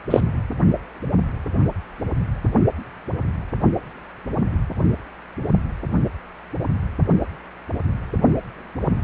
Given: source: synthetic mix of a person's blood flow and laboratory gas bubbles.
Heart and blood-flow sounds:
Doppler ultrasound of blood flow; precordium
0.10-0.20 s: bubbles
From the record:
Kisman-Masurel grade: 213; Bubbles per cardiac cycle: several, 3 to 8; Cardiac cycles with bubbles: 1 to 10%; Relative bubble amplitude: loud (0.450 to 0.775); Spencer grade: 1 (occasional bubble signal discernible with the cardiac motion signal, with majority of cardiac periods free of bubbles); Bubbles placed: anywhere in the cardiac cycle

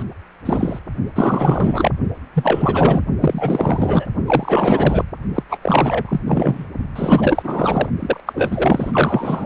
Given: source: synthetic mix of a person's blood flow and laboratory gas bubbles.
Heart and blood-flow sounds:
Doppler ultrasound of blood flow; precordium
0.00-0.03 s: bubbles
0.45-0.79 s: bubbles
1.15-1.91 s: bubbles
2.33-3.02 s: bubbles
3.20-4.06 s: bubbles
4.26-5.05 s: bubbles
5.34-5.43 s: bubbles
5.49-5.58 s: bubbles
5.62-6.21 s: bubbles
6.25-6.66 s: bubbles
6.96-7.90 s: bubbles
7.99-8.20 s: bubbles
8.26-9.46 s: bubbles
From the record:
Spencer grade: 4 (maximum detectable bubble signal sounding continuously throughout systole and diastole of every cardiac period, and overriding the amplitude of the normal cardiac signals); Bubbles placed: only in the low amplitude regions of the cardiac cycle

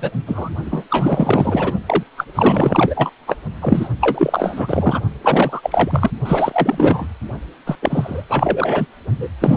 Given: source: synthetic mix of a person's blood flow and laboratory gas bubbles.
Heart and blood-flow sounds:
Doppler ultrasound of blood flow; precordium
0.00-0.11 s: bubbles
0.26-0.49 s: bubbles
0.65-0.84 s: bubbles
0.90-1.74 s: bubbles
1.86-2.03 s: bubbles
2.17-2.24 s: bubbles
2.35-3.10 s: bubbles
3.26-3.36 s: bubbles
3.60-3.88 s: bubbles
4.00-5.00 s: bubbles
5.22-6.11 s: bubbles
6.25-7.07 s: bubbles
7.66-7.77 s: bubbles
7.81-8.24 s: bubbles
8.29-8.87 s: bubbles
9.18-9.29 s: bubbles
9.40-9.57 s: bubbles
From the record:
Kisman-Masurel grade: 444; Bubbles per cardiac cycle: continuous sound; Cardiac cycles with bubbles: 100%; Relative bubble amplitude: maximal (0.775 to 0.999); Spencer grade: 4 (maximum detectable bubble signal sounding continuously throughout systole and diastole of every cardiac period, and overriding the amplitude of the normal cardiac signals); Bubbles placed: only in the low amplitude regions of the cardiac cycle

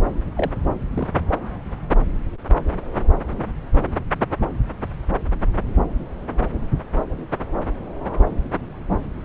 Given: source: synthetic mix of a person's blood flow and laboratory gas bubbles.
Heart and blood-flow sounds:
Doppler ultrasound of blood flow; subclavian vein
0.35-0.51 s: bubbles
0.94-1.08 s: bubbles
From the record:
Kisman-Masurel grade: 111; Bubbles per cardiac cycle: 1 to 2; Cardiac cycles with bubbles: 1 to 10%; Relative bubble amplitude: barely perceptible (0.100 to 0.250); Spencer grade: 1 (occasional bubble signal discernible with the cardiac motion signal, with majority of cardiac periods free of bubbles); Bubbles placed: anywhere in the cardiac cycle

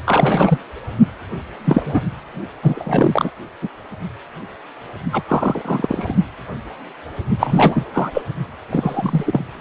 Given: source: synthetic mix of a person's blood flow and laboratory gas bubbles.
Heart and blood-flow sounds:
Doppler ultrasound of blood flow; precordium
0.05-0.58 s: bubbles
1.64-2.02 s: bubbles
2.62-3.31 s: bubbles
3.61-3.68 s: bubbles
5.12-5.23 s: bubbles
5.28-5.62 s: bubbles
5.65-6.15 s: bubbles
7.39-7.85 s: bubbles
7.93-8.12 s: bubbles
8.14-8.22 s: bubbles
8.70-9.45 s: bubbles
9.53-9.61 s: bubbles
From the record:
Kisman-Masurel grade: 233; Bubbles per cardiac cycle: several, 3 to 8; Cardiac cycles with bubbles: 50 to 99%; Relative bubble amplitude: loud (0.450 to 0.775); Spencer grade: 3 (all of the cardiac periods contain showers or single bubble signals, but not dominating or overriding the cardiac motion signals); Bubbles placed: only in the low amplitude regions of the cardiac cycle

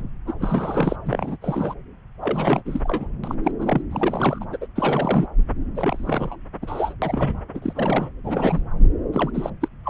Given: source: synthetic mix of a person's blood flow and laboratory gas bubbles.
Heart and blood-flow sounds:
Doppler ultrasound of blood flow; subclavian vein
0.00-0.10 s: bubbles
0.27-0.34 s: bubbles
0.39-0.96 s: bubbles
1.05-1.36 s: bubbles
1.42-1.74 s: bubbles
2.21-2.62 s: bubbles
2.65-3.07 s: bubbles
3.23-3.35 s: bubbles
3.44-3.52 s: bubbles
3.59-3.82 s: bubbles
3.91-4.45 s: bubbles
4.51-4.57 s: bubbles
4.61-4.67 s: bubbles
4.76-5.28 s: bubbles
5.76-6.36 s: bubbles
6.62-6.94 s: bubbles
7.02-7.40 s: bubbles
7.55-8.09 s: bubbles
8.24-8.62 s: bubbles
9.12-9.31 s: bubbles
9.34-9.50 s: bubbles
9.61-9.68 s: bubbles
9.84-9.90 s: bubbles
From the record:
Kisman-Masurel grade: 342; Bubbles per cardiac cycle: rolling drumbeat, 9 or more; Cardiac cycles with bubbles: 100%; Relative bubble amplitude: moderate (0.250 to 0.450); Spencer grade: 3 (all of the cardiac periods contain showers or single bubble signals, but not dominating or overriding the cardiac motion signals); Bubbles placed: anywhere in the cardiac cycle

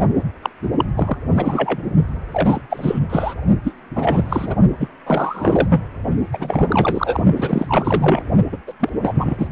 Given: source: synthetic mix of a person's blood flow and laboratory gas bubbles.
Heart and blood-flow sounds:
Doppler ultrasound of blood flow; precordium
0.42-0.49 s: bubbles
0.77-0.85 s: bubbles
0.95-1.16 s: bubbles
1.36-1.82 s: bubbles
2.31-2.62 s: bubbles
2.69-3.00 s: bubbles
3.09-3.34 s: bubbles
3.63-3.72 s: bubbles
3.95-4.56 s: bubbles
4.79-4.88 s: bubbles
5.06-5.81 s: bubbles
6.33-7.24 s: bubbles
7.37-8.22 s: bubbles
8.52-8.57 s: bubbles
8.67-8.73 s: bubbles
8.79-8.89 s: bubbles
9.02-9.47 s: bubbles
From the record:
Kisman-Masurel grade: 343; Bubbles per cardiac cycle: rolling drumbeat, 9 or more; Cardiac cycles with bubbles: 100%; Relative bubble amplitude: loud (0.450 to 0.775); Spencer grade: 3 (all of the cardiac periods contain showers or single bubble signals, but not dominating or overriding the cardiac motion signals); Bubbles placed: only in the low amplitude regions of the cardiac cycle

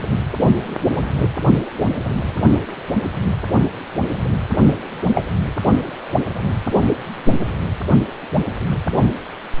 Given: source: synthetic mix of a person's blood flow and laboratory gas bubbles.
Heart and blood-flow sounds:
Doppler ultrasound of blood flow; precordium
5.15-5.25 s: bubbles
From the record:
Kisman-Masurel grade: 113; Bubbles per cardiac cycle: 1 to 2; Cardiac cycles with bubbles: 1 to 10%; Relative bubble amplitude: loud (0.450 to 0.775); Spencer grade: 1 (occasional bubble signal discernible with the cardiac motion signal, with majority of cardiac periods free of bubbles); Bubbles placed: only in the low amplitude regions of the cardiac cycle

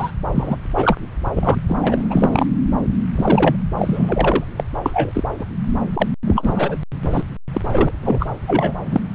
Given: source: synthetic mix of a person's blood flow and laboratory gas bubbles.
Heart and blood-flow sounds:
Doppler ultrasound of blood flow; subclavian vein
0.00-0.11 s: bubbles
0.34-0.56 s: bubbles
0.74-0.96 s: bubbles
1.35-1.55 s: bubbles
1.68-1.77 s: bubbles
1.82-2.46 s: bubbles
3.15-3.56 s: bubbles
3.77-4.44 s: bubbles
4.56-4.64 s: bubbles
4.85-5.23 s: bubbles
5.39-5.46 s: bubbles
5.93-6.08 s: bubbles
6.27-6.77 s: bubbles
7.03-7.23 s: bubbles
7.53-7.62 s: bubbles
7.71-7.91 s: bubbles
8.03-8.26 s: bubbles
8.47-8.73 s: bubbles
8.86-8.99 s: bubbles
From the record:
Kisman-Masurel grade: 343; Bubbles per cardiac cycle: rolling drumbeat, 9 or more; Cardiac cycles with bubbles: 100%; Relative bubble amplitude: loud (0.450 to 0.775); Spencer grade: 3 (all of the cardiac periods contain showers or single bubble signals, but not dominating or overriding the cardiac motion signals); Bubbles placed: anywhere in the cardiac cycle

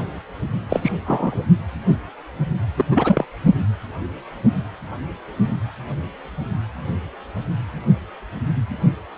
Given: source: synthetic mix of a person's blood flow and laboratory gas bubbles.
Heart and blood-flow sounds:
Doppler ultrasound of blood flow; precordium
0.70-0.92 s: bubbles
1.06-1.44 s: bubbles
2.78-2.84 s: bubbles
2.91-3.25 s: bubbles
From the record:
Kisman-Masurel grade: 212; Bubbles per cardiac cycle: several, 3 to 8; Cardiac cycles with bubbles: 1 to 10%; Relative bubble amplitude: moderate (0.250 to 0.450); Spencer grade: 1 (occasional bubble signal discernible with the cardiac motion signal, with majority of cardiac periods free of bubbles); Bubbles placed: only in the low amplitude regions of the cardiac cycle

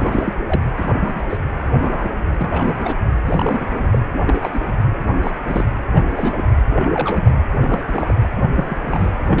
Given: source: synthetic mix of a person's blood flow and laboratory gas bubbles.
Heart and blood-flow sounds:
Doppler ultrasound of blood flow; precordium
0.00-0.33 s: bubbles
0.46-0.61 s: bubbles
0.76-1.27 s: bubbles
1.29-1.38 s: bubbles
1.80-2.11 s: bubbles
2.40-2.79 s: bubbles
2.83-2.97 s: bubbles
3.25-3.67 s: bubbles
3.69-3.87 s: bubbles
3.91-3.99 s: bubbles
4.13-4.20 s: bubbles
4.25-4.61 s: bubbles
5.23-5.31 s: bubbles
5.45-5.64 s: bubbles
5.92-6.02 s: bubbles
6.16-6.44 s: bubbles
6.71-7.32 s: bubbles
7.59-8.14 s: bubbles
8.54-8.78 s: bubbles
8.85-9.12 s: bubbles
9.26-9.40 s: bubbles
From the record:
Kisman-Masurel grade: 242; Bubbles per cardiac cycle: several, 3 to 8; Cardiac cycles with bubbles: 100%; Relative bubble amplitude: moderate (0.250 to 0.450); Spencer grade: 3 (all of the cardiac periods contain showers or single bubble signals, but not dominating or overriding the cardiac motion signals); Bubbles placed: anywhere in the cardiac cycle

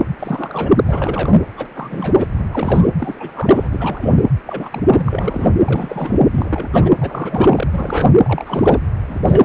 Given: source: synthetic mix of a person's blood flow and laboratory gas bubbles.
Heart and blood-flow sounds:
Doppler ultrasound of blood flow; precordium
0.19-0.71 s: bubbles
0.75-0.83 s: bubbles
0.88-1.39 s: bubbles
1.57-1.68 s: bubbles
1.75-2.28 s: bubbles
2.34-2.45 s: bubbles
2.51-2.88 s: bubbles
3.00-3.67 s: bubbles
3.71-4.14 s: bubbles
4.46-4.83 s: bubbles
4.90-5.54 s: bubbles
5.63-6.20 s: bubbles
6.31-6.68 s: bubbles
6.73-6.93 s: bubbles
7.00-7.67 s: bubbles
7.72-8.11 s: bubbles
8.23-8.80 s: bubbles
9.09-9.45 s: bubbles
From the record:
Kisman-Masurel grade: 342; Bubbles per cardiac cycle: rolling drumbeat, 9 or more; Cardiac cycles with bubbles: 100%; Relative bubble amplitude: moderate (0.250 to 0.450); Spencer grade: 3 (all of the cardiac periods contain showers or single bubble signals, but not dominating or overriding the cardiac motion signals); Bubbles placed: anywhere in the cardiac cycle

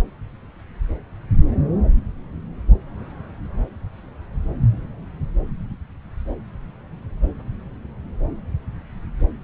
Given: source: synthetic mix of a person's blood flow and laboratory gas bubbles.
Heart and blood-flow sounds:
Doppler ultrasound of blood flow; subclavian vein
no bubbles
From the record:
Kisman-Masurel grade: 000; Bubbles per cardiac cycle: 0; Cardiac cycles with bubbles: 0%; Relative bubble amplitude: no bubbles discernible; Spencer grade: 0 (complete lack of bubble signals)

